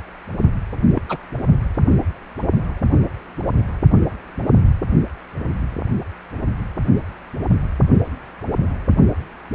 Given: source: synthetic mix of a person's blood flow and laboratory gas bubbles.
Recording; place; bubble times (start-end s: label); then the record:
Doppler ultrasound of blood flow; precordium
0.94-1.02 s: bubbles
1.09-1.17 s: bubbles
From the record:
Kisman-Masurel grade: 112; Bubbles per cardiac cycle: 1 to 2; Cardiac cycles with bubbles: 1 to 10%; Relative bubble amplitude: moderate (0.250 to 0.450); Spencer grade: 1 (occasional bubble signal discernible with the cardiac motion signal, with majority of cardiac periods free of bubbles); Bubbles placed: only in the low amplitude regions of the cardiac cycle